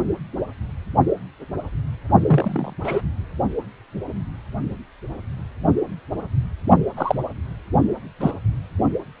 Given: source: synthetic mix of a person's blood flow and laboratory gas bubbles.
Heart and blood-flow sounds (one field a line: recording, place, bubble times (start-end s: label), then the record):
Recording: Doppler ultrasound of blood flow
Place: precordium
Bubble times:
2.25-2.74 s: bubbles
2.83-3.01 s: bubbles
6.96-7.20 s: bubbles
8.20-8.31 s: bubbles
From the record:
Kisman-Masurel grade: 122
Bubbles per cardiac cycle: 1 to 2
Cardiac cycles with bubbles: 10 to 50%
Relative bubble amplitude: moderate (0.250 to 0.450)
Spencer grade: 2 (many but less than half of the cardiac periods contain bubble signals, singularly or in groups)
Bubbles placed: only in the low amplitude regions of the cardiac cycle